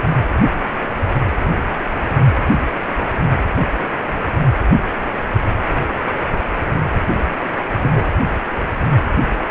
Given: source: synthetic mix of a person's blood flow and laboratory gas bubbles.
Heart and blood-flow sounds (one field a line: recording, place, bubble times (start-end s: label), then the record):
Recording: Doppler ultrasound of blood flow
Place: precordium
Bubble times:
7.79-7.93 s: bubbles
7.95-8.07 s: bubbles
From the record:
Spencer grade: 2 (many but less than half of the cardiac periods contain bubble signals, singularly or in groups)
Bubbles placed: anywhere in the cardiac cycle